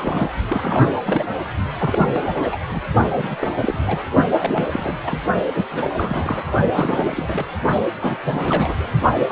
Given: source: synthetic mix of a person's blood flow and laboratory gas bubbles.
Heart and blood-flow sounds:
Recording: Doppler ultrasound of blood flow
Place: precordium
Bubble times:
0.00-0.31 s: bubbles
0.48-0.93 s: bubbles
1.06-1.24 s: bubbles
1.79-2.56 s: bubbles
2.71-2.81 s: bubbles
3.13-3.36 s: bubbles
3.40-3.54 s: bubbles
3.60-4.03 s: bubbles
4.38-5.00 s: bubbles
5.04-5.19 s: bubbles
5.54-5.64 s: bubbles
5.71-5.90 s: bubbles
5.96-6.51 s: bubbles
6.73-7.45 s: bubbles
8.00-8.16 s: bubbles
8.24-8.86 s: bubbles
9.18-9.32 s: bubbles
From the record:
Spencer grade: 3 (all of the cardiac periods contain showers or single bubble signals, but not dominating or overriding the cardiac motion signals)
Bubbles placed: only in the low amplitude regions of the cardiac cycle

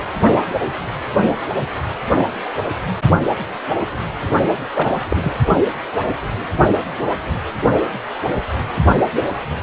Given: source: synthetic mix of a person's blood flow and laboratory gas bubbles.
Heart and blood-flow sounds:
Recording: Doppler ultrasound of blood flow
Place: precordium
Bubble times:
4.74-4.95 s: bubbles
5.08-5.41 s: bubbles
From the record:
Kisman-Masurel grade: 212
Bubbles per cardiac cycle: several, 3 to 8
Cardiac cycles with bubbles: 1 to 10%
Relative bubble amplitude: moderate (0.250 to 0.450)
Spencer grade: 1 (occasional bubble signal discernible with the cardiac motion signal, with majority of cardiac periods free of bubbles)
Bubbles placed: only in the low amplitude regions of the cardiac cycle

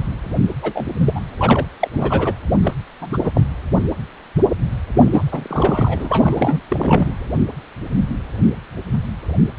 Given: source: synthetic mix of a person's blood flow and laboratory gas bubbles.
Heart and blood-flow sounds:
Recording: Doppler ultrasound of blood flow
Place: precordium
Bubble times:
0.61-0.86 s: bubbles
0.99-1.20 s: bubbles
1.39-1.66 s: bubbles
1.79-1.89 s: bubbles
1.92-2.33 s: bubbles
2.63-2.73 s: bubbles
3.01-3.17 s: bubbles
3.23-3.31 s: bubbles
3.34-3.46 s: bubbles
4.95-6.61 s: bubbles
6.70-7.12 s: bubbles
From the record:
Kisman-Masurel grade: 222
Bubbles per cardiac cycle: several, 3 to 8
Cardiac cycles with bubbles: 10 to 50%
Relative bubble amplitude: moderate (0.250 to 0.450)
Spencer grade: 2 (many but less than half of the cardiac periods contain bubble signals, singularly or in groups)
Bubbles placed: anywhere in the cardiac cycle

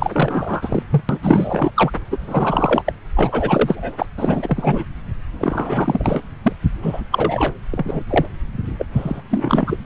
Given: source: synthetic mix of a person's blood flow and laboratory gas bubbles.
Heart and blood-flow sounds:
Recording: Doppler ultrasound of blood flow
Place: subclavian vein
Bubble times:
0.00-0.83 s: bubbles
0.91-1.02 s: bubbles
1.09-1.19 s: bubbles
1.22-1.71 s: bubbles
1.76-1.91 s: bubbles
2.10-2.19 s: bubbles
2.27-2.83 s: bubbles
2.86-2.93 s: bubbles
3.16-4.06 s: bubbles
4.17-4.84 s: bubbles
5.39-6.22 s: bubbles
6.42-6.52 s: bubbles
6.82-7.01 s: bubbles
7.11-7.54 s: bubbles
7.71-8.03 s: bubbles
8.09-8.25 s: bubbles
8.79-8.86 s: bubbles
8.95-9.21 s: bubbles
9.29-9.77 s: bubbles
From the record:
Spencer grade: 3 (all of the cardiac periods contain showers or single bubble signals, but not dominating or overriding the cardiac motion signals)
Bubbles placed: anywhere in the cardiac cycle

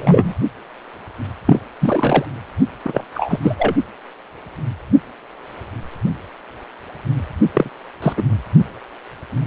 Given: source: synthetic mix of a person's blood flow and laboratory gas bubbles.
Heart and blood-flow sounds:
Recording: Doppler ultrasound of blood flow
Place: precordium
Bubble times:
0.00-0.35 s: bubbles
1.46-1.60 s: bubbles
1.81-2.25 s: bubbles
2.84-3.04 s: bubbles
3.14-3.40 s: bubbles
3.42-3.56 s: bubbles
3.58-3.74 s: bubbles
7.54-7.70 s: bubbles
8.02-8.13 s: bubbles
8.16-8.23 s: bubbles
From the record:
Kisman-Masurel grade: 233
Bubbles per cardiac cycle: several, 3 to 8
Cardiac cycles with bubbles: 50 to 99%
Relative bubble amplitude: loud (0.450 to 0.775)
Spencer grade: 3 (all of the cardiac periods contain showers or single bubble signals, but not dominating or overriding the cardiac motion signals)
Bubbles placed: only in the low amplitude regions of the cardiac cycle

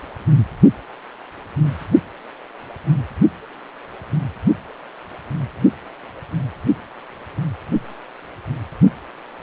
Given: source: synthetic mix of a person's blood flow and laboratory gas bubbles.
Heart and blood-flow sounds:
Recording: Doppler ultrasound of blood flow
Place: precordium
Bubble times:
no bubbles
From the record:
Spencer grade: 0 (complete lack of bubble signals)

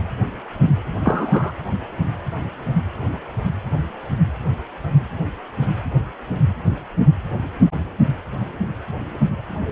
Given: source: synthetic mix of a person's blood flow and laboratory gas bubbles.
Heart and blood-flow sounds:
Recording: Doppler ultrasound of blood flow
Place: precordium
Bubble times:
1.03-1.52 s: bubbles
From the record:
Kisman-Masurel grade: 113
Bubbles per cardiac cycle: 1 to 2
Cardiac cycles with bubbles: 1 to 10%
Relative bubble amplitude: loud (0.450 to 0.775)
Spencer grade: 1 (occasional bubble signal discernible with the cardiac motion signal, with majority of cardiac periods free of bubbles)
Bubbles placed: anywhere in the cardiac cycle

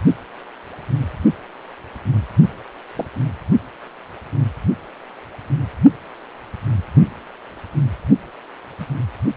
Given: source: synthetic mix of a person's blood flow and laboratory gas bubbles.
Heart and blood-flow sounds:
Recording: Doppler ultrasound of blood flow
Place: precordium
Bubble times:
2.96-3.05 s: bubbles
8.79-8.86 s: bubbles
From the record:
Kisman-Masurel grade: 122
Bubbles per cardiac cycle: 1 to 2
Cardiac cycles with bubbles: 10 to 50%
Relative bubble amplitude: moderate (0.250 to 0.450)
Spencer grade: 2 (many but less than half of the cardiac periods contain bubble signals, singularly or in groups)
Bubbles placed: only in the low amplitude regions of the cardiac cycle

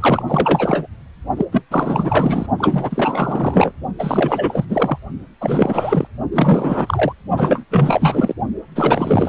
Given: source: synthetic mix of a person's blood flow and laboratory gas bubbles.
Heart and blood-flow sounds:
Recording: Doppler ultrasound of blood flow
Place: precordium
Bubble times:
0.00-0.22 s: bubbles
0.28-0.86 s: bubbles
1.36-1.45 s: bubbles
1.52-1.62 s: bubbles
1.70-2.46 s: bubbles
2.58-3.72 s: bubbles
3.99-4.65 s: bubbles
4.69-4.98 s: bubbles
5.41-6.07 s: bubbles
6.32-7.13 s: bubbles
7.37-7.64 s: bubbles
7.70-8.33 s: bubbles
8.75-9.29 s: bubbles
From the record:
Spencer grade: 4 (maximum detectable bubble signal sounding continuously throughout systole and diastole of every cardiac period, and overriding the amplitude of the normal cardiac signals)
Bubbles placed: only in the low amplitude regions of the cardiac cycle

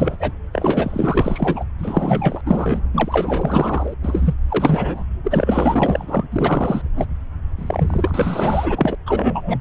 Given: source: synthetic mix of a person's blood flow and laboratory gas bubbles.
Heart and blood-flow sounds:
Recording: Doppler ultrasound of blood flow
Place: subclavian vein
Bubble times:
0.00-0.16 s: bubbles
0.20-0.32 s: bubbles
0.52-1.64 s: bubbles
1.78-2.41 s: bubbles
2.45-2.81 s: bubbles
2.93-3.94 s: bubbles
4.03-4.35 s: bubbles
4.49-5.04 s: bubbles
5.23-6.25 s: bubbles
6.32-6.89 s: bubbles
6.96-7.06 s: bubbles
7.58-8.95 s: bubbles
9.06-9.61 s: bubbles
From the record:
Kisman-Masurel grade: 444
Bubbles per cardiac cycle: continuous sound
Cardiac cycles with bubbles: 100%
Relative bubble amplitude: maximal (0.775 to 0.999)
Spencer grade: 4 (maximum detectable bubble signal sounding continuously throughout systole and diastole of every cardiac period, and overriding the amplitude of the normal cardiac signals)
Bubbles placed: anywhere in the cardiac cycle

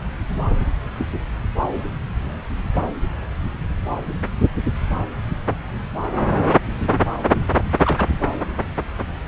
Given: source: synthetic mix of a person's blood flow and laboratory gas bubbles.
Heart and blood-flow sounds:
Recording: Doppler ultrasound of blood flow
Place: subclavian vein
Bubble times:
7.29-7.47 s: bubbles
7.82-8.06 s: bubbles
From the record:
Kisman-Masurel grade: 212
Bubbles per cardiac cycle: several, 3 to 8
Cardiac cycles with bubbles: 1 to 10%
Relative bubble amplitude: moderate (0.250 to 0.450)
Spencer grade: 1 (occasional bubble signal discernible with the cardiac motion signal, with majority of cardiac periods free of bubbles)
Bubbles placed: anywhere in the cardiac cycle

